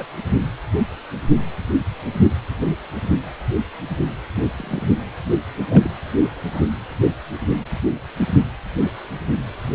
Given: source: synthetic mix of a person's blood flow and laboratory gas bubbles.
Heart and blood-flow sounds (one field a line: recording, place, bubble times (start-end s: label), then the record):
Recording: Doppler ultrasound of blood flow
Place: precordium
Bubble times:
0.00-0.05 s: bubbles
4.35-4.43 s: bubbles
4.58-4.88 s: bubbles
5.69-5.90 s: bubbles
6.51-6.69 s: bubbles
From the record:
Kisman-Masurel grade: 121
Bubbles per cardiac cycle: 1 to 2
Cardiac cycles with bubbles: 10 to 50%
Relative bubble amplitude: barely perceptible (0.100 to 0.250)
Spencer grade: 2 (many but less than half of the cardiac periods contain bubble signals, singularly or in groups)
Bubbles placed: anywhere in the cardiac cycle